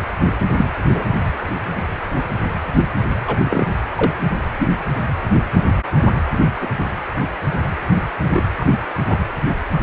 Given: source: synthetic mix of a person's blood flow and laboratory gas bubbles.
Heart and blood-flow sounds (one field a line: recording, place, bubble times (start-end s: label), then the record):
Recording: Doppler ultrasound of blood flow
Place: precordium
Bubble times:
0.56-0.69 s: bubbles
0.88-1.06 s: bubbles
3.27-3.38 s: bubbles
3.44-3.67 s: bubbles
3.96-4.14 s: bubbles
4.58-4.69 s: bubbles
6.62-6.67 s: bubbles
8.28-8.42 s: bubbles
8.60-8.65 s: bubbles
9.07-9.19 s: bubbles
From the record:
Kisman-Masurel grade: 123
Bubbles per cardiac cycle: 1 to 2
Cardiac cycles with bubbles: 10 to 50%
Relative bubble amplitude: loud (0.450 to 0.775)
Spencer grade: 2 (many but less than half of the cardiac periods contain bubble signals, singularly or in groups)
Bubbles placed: anywhere in the cardiac cycle